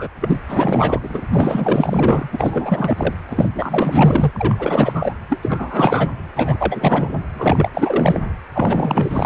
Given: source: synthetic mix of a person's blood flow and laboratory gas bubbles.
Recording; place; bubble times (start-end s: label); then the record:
Doppler ultrasound of blood flow; precordium
0.00-0.08 s: bubbles
0.20-0.38 s: bubbles
0.48-1.21 s: bubbles
1.31-2.29 s: bubbles
2.32-3.15 s: bubbles
3.29-3.48 s: bubbles
3.54-5.14 s: bubbles
5.28-6.09 s: bubbles
6.35-7.21 s: bubbles
7.35-7.69 s: bubbles
7.73-8.24 s: bubbles
8.53-9.26 s: bubbles
From the record:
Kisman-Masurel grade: 444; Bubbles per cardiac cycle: continuous sound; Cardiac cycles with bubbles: 100%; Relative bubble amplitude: maximal (0.775 to 0.999); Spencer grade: 4 (maximum detectable bubble signal sounding continuously throughout systole and diastole of every cardiac period, and overriding the amplitude of the normal cardiac signals); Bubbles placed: anywhere in the cardiac cycle